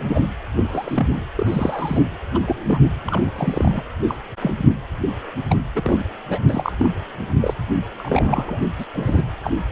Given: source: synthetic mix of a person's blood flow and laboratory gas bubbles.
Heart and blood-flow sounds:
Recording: Doppler ultrasound of blood flow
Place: precordium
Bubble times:
0.00-0.29 s: bubbles
0.56-1.07 s: bubbles
1.35-2.01 s: bubbles
2.34-2.40 s: bubbles
2.46-2.90 s: bubbles
3.04-3.31 s: bubbles
3.35-3.81 s: bubbles
4.08-4.17 s: bubbles
4.41-4.53 s: bubbles
5.49-5.58 s: bubbles
5.75-6.05 s: bubbles
6.29-6.40 s: bubbles
6.49-6.72 s: bubbles
6.79-6.90 s: bubbles
7.41-7.54 s: bubbles
7.98-8.59 s: bubbles
8.62-8.67 s: bubbles
8.79-8.86 s: bubbles
8.94-9.22 s: bubbles
9.43-9.51 s: bubbles
From the record:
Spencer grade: 3 (all of the cardiac periods contain showers or single bubble signals, but not dominating or overriding the cardiac motion signals)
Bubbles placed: anywhere in the cardiac cycle

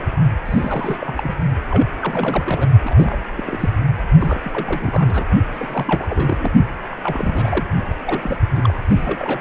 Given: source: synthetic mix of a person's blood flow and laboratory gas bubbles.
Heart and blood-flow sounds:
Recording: Doppler ultrasound of blood flow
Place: precordium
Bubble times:
0.45-1.36 s: bubbles
1.70-1.88 s: bubbles
1.99-2.69 s: bubbles
2.83-3.17 s: bubbles
3.37-3.70 s: bubbles
4.20-5.25 s: bubbles
5.52-6.06 s: bubbles
6.09-6.51 s: bubbles
6.91-7.64 s: bubbles
7.89-7.94 s: bubbles
8.04-8.36 s: bubbles
8.55-8.73 s: bubbles
8.88-9.41 s: bubbles
From the record:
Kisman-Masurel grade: 342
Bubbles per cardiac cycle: rolling drumbeat, 9 or more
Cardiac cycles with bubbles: 100%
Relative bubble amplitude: moderate (0.250 to 0.450)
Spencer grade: 3 (all of the cardiac periods contain showers or single bubble signals, but not dominating or overriding the cardiac motion signals)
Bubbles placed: only in the low amplitude regions of the cardiac cycle

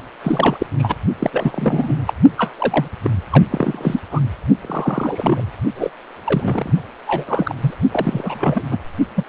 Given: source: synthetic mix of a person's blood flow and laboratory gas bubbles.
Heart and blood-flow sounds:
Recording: Doppler ultrasound of blood flow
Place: precordium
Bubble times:
0.23-0.66 s: bubbles
0.79-0.96 s: bubbles
1.19-2.03 s: bubbles
2.07-2.13 s: bubbles
2.37-2.52 s: bubbles
2.58-2.88 s: bubbles
3.03-3.10 s: bubbles
3.30-3.44 s: bubbles
3.51-4.00 s: bubbles
4.11-4.20 s: bubbles
4.62-5.51 s: bubbles
5.75-5.90 s: bubbles
6.25-6.73 s: bubbles
7.07-7.54 s: bubbles
7.60-7.74 s: bubbles
7.91-8.64 s: bubbles
8.71-8.77 s: bubbles
9.16-9.24 s: bubbles
From the record:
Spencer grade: 3 (all of the cardiac periods contain showers or single bubble signals, but not dominating or overriding the cardiac motion signals)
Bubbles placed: only in the low amplitude regions of the cardiac cycle

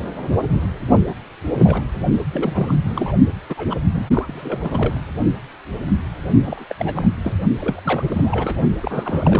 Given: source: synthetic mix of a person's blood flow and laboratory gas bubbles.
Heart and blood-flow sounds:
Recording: Doppler ultrasound of blood flow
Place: precordium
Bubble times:
1.06-1.14 s: bubbles
1.44-1.83 s: bubbles
2.33-2.77 s: bubbles
2.84-3.12 s: bubbles
3.49-3.77 s: bubbles
3.92-4.06 s: bubbles
4.11-5.00 s: bubbles
6.44-6.65 s: bubbles
6.69-6.76 s: bubbles
6.78-7.10 s: bubbles
7.23-7.37 s: bubbles
7.60-7.80 s: bubbles
7.84-8.04 s: bubbles
8.08-8.62 s: bubbles
8.80-9.40 s: bubbles
From the record:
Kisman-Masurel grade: 332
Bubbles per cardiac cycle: rolling drumbeat, 9 or more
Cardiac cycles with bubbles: 50 to 99%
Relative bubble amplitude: moderate (0.250 to 0.450)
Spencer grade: 3 (all of the cardiac periods contain showers or single bubble signals, but not dominating or overriding the cardiac motion signals)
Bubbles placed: only in the low amplitude regions of the cardiac cycle

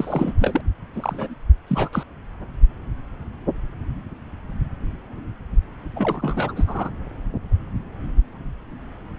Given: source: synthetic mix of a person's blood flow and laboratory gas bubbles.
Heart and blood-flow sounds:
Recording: Doppler ultrasound of blood flow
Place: subclavian vein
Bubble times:
0.00-0.33 s: bubbles
0.38-0.61 s: bubbles
0.93-1.34 s: bubbles
1.67-1.89 s: bubbles
1.92-2.04 s: bubbles
5.95-6.90 s: bubbles
From the record:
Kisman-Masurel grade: 332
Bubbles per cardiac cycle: rolling drumbeat, 9 or more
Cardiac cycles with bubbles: 50 to 99%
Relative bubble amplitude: moderate (0.250 to 0.450)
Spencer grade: 3 (all of the cardiac periods contain showers or single bubble signals, but not dominating or overriding the cardiac motion signals)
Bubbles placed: anywhere in the cardiac cycle

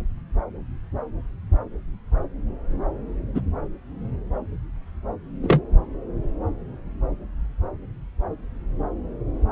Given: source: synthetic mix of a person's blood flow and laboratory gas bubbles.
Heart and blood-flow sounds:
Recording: Doppler ultrasound of blood flow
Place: subclavian vein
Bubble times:
3.35-3.41 s: bubbles
5.43-5.60 s: bubbles
From the record:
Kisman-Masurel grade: 113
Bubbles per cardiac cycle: 1 to 2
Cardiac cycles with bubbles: 1 to 10%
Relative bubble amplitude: loud (0.450 to 0.775)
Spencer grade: 1 (occasional bubble signal discernible with the cardiac motion signal, with majority of cardiac periods free of bubbles)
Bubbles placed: anywhere in the cardiac cycle

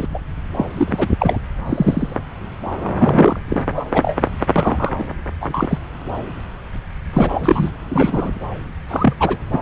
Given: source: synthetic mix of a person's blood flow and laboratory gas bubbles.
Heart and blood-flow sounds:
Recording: Doppler ultrasound of blood flow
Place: subclavian vein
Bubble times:
0.00-0.07 s: bubbles
0.14-0.19 s: bubbles
0.56-0.65 s: bubbles
0.77-1.08 s: bubbles
1.19-1.38 s: bubbles
1.66-2.17 s: bubbles
2.97-3.40 s: bubbles
3.48-3.62 s: bubbles
3.76-3.85 s: bubbles
3.93-4.16 s: bubbles
4.55-4.95 s: bubbles
4.99-5.04 s: bubbles
5.41-5.79 s: bubbles
7.13-7.71 s: bubbles
7.90-8.30 s: bubbles
8.89-9.14 s: bubbles
9.20-9.38 s: bubbles
9.52-9.62 s: bubbles
From the record:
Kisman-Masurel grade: 233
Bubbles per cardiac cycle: several, 3 to 8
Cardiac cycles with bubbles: 50 to 99%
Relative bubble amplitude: loud (0.450 to 0.775)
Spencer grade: 3 (all of the cardiac periods contain showers or single bubble signals, but not dominating or overriding the cardiac motion signals)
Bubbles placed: anywhere in the cardiac cycle

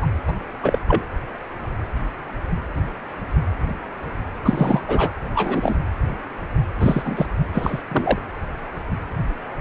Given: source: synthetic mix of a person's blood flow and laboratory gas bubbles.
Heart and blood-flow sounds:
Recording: Doppler ultrasound of blood flow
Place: precordium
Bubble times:
0.00-0.07 s: bubbles
0.27-0.32 s: bubbles
0.62-0.78 s: bubbles
0.88-1.04 s: bubbles
4.43-4.82 s: bubbles
4.88-5.10 s: bubbles
5.35-5.76 s: bubbles
6.77-7.27 s: bubbles
7.53-7.82 s: bubbles
7.91-8.18 s: bubbles
From the record:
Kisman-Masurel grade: 223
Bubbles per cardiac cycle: several, 3 to 8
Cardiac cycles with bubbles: 10 to 50%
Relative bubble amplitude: loud (0.450 to 0.775)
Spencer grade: 2 (many but less than half of the cardiac periods contain bubble signals, singularly or in groups)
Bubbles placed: anywhere in the cardiac cycle

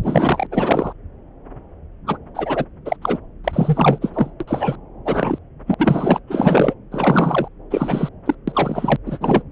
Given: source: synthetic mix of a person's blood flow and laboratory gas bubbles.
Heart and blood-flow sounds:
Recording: Doppler ultrasound of blood flow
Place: subclavian vein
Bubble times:
0.03-0.47 s: bubbles
0.51-0.93 s: bubbles
2.06-2.17 s: bubbles
2.34-2.65 s: bubbles
2.85-2.96 s: bubbles
3.02-3.19 s: bubbles
3.44-3.98 s: bubbles
4.01-4.31 s: bubbles
4.40-4.44 s: bubbles
4.47-4.76 s: bubbles
5.05-5.39 s: bubbles
5.67-5.75 s: bubbles
5.78-6.20 s: bubbles
6.27-6.75 s: bubbles
6.92-7.48 s: bubbles
7.70-8.09 s: bubbles
8.25-8.35 s: bubbles
8.47-8.96 s: bubbles
9.05-9.42 s: bubbles
From the record:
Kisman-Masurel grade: 233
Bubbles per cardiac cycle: several, 3 to 8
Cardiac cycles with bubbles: 50 to 99%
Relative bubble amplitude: loud (0.450 to 0.775)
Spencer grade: 3 (all of the cardiac periods contain showers or single bubble signals, but not dominating or overriding the cardiac motion signals)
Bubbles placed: anywhere in the cardiac cycle

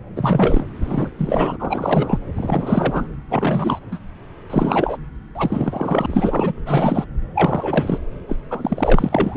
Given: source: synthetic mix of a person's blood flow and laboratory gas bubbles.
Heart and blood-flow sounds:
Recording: Doppler ultrasound of blood flow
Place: subclavian vein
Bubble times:
0.15-0.66 s: bubbles
0.81-1.09 s: bubbles
1.18-2.18 s: bubbles
2.37-3.05 s: bubbles
3.29-3.79 s: bubbles
3.92-3.99 s: bubbles
4.50-4.98 s: bubbles
5.35-6.06 s: bubbles
6.10-6.52 s: bubbles
6.65-7.05 s: bubbles
7.34-7.98 s: bubbles
8.29-8.36 s: bubbles
8.50-9.36 s: bubbles
From the record:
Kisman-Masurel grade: 333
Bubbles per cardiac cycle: rolling drumbeat, 9 or more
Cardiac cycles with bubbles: 50 to 99%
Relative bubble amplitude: loud (0.450 to 0.775)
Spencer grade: 3 (all of the cardiac periods contain showers or single bubble signals, but not dominating or overriding the cardiac motion signals)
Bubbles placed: anywhere in the cardiac cycle

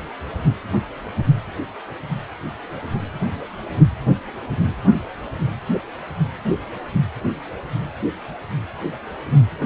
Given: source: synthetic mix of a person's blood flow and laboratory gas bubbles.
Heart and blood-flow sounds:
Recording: Doppler ultrasound of blood flow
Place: precordium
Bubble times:
no bubbles
From the record:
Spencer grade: 0 (complete lack of bubble signals)

